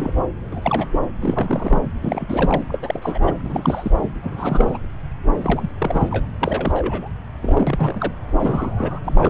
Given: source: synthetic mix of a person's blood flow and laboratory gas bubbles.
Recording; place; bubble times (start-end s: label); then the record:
Doppler ultrasound of blood flow; subclavian vein
0.00-0.11 s: bubbles
0.52-0.88 s: bubbles
0.91-0.99 s: bubbles
1.21-1.81 s: bubbles
1.85-1.92 s: bubbles
2.01-2.63 s: bubbles
2.68-2.78 s: bubbles
2.82-3.19 s: bubbles
3.21-3.33 s: bubbles
3.44-4.08 s: bubbles
4.23-4.79 s: bubbles
5.42-5.71 s: bubbles
5.78-6.27 s: bubbles
6.41-7.08 s: bubbles
7.42-8.12 s: bubbles
8.38-9.00 s: bubbles
9.05-9.30 s: bubbles
From the record:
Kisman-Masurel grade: 342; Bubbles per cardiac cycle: rolling drumbeat, 9 or more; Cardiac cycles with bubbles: 100%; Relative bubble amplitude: moderate (0.250 to 0.450); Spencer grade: 3 (all of the cardiac periods contain showers or single bubble signals, but not dominating or overriding the cardiac motion signals); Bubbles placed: anywhere in the cardiac cycle